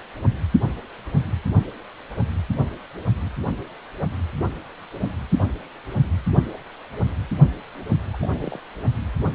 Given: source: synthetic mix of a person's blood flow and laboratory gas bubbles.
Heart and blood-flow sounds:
Doppler ultrasound of blood flow; precordium
8.13-8.17 s: bubbles
8.22-8.26 s: bubbles
8.29-8.59 s: bubbles
From the record:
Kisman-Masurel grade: 111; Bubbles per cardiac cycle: 1 to 2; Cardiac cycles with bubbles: 1 to 10%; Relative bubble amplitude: barely perceptible (0.100 to 0.250); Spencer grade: 1 (occasional bubble signal discernible with the cardiac motion signal, with majority of cardiac periods free of bubbles); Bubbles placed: only in the low amplitude regions of the cardiac cycle

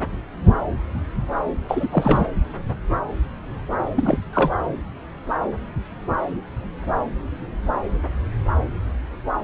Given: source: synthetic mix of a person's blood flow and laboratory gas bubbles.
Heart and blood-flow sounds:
Doppler ultrasound of blood flow; subclavian vein
1.68-2.25 s: bubbles
3.96-4.19 s: bubbles
4.33-4.51 s: bubbles
From the record:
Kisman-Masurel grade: 212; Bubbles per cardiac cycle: several, 3 to 8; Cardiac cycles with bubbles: 1 to 10%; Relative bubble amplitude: moderate (0.250 to 0.450); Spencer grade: 1 (occasional bubble signal discernible with the cardiac motion signal, with majority of cardiac periods free of bubbles); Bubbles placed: anywhere in the cardiac cycle

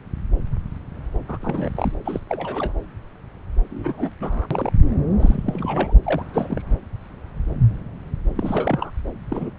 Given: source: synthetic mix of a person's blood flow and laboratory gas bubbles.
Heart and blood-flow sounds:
Doppler ultrasound of blood flow; subclavian vein
1.28-1.38 s: bubbles
1.42-1.71 s: bubbles
1.75-1.92 s: bubbles
2.05-2.20 s: bubbles
2.29-2.73 s: bubbles
3.71-4.12 s: bubbles
4.20-4.46 s: bubbles
4.50-4.72 s: bubbles
5.19-5.93 s: bubbles
6.04-6.22 s: bubbles
6.33-6.62 s: bubbles
8.36-8.91 s: bubbles
9.29-9.51 s: bubbles
From the record:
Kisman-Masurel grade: 232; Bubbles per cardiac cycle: several, 3 to 8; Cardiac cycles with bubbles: 50 to 99%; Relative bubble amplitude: moderate (0.250 to 0.450); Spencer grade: 3 (all of the cardiac periods contain showers or single bubble signals, but not dominating or overriding the cardiac motion signals); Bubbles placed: anywhere in the cardiac cycle

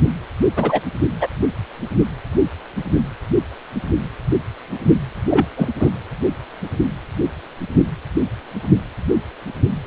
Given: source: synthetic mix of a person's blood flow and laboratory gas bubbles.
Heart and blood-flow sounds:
Doppler ultrasound of blood flow; precordium
0.56-0.81 s: bubbles
1.20-1.28 s: bubbles
5.29-5.46 s: bubbles
5.57-5.69 s: bubbles
5.79-5.91 s: bubbles
From the record:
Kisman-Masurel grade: 223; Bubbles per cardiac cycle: several, 3 to 8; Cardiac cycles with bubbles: 10 to 50%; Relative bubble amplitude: loud (0.450 to 0.775); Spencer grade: 2 (many but less than half of the cardiac periods contain bubble signals, singularly or in groups); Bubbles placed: anywhere in the cardiac cycle

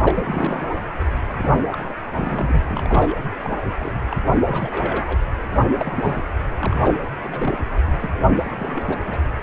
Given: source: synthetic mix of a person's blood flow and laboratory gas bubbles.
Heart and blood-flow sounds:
Doppler ultrasound of blood flow; precordium
0.04-0.72 s: bubbles
0.89-0.93 s: bubbles
1.26-1.33 s: bubbles
1.38-1.93 s: bubbles
2.14-2.62 s: bubbles
2.68-3.15 s: bubbles
3.43-3.57 s: bubbles
3.79-3.92 s: bubbles
4.09-4.17 s: bubbles
4.31-4.38 s: bubbles
4.44-5.04 s: bubbles
5.06-5.19 s: bubbles
5.52-5.61 s: bubbles
5.77-6.25 s: bubbles
6.59-7.02 s: bubbles
7.23-7.57 s: bubbles
7.86-7.93 s: bubbles
8.00-8.11 s: bubbles
8.26-8.43 s: bubbles
8.57-9.19 s: bubbles
9.40-9.43 s: bubbles
From the record:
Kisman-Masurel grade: 342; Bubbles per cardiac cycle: rolling drumbeat, 9 or more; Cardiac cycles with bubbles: 100%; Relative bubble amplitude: moderate (0.250 to 0.450); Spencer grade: 3 (all of the cardiac periods contain showers or single bubble signals, but not dominating or overriding the cardiac motion signals); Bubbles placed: anywhere in the cardiac cycle

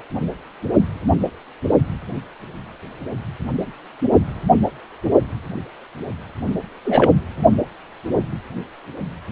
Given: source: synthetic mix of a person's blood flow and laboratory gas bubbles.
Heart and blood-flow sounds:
Doppler ultrasound of blood flow; precordium
6.85-7.12 s: bubbles
From the record:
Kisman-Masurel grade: 223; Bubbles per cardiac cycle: several, 3 to 8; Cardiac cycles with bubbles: 10 to 50%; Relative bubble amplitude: loud (0.450 to 0.775); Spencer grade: 2 (many but less than half of the cardiac periods contain bubble signals, singularly or in groups); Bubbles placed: only in the low amplitude regions of the cardiac cycle

